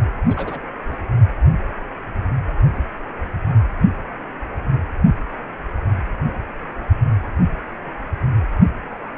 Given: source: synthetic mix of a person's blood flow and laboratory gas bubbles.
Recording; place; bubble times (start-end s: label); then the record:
Doppler ultrasound of blood flow; precordium
0.26-0.59 s: bubbles
0.85-0.97 s: bubbles
1.06-1.09 s: bubbles
From the record:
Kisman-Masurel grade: 121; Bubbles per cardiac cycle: 1 to 2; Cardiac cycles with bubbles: 10 to 50%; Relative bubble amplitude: barely perceptible (0.100 to 0.250); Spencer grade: 2 (many but less than half of the cardiac periods contain bubble signals, singularly or in groups); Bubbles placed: only in the low amplitude regions of the cardiac cycle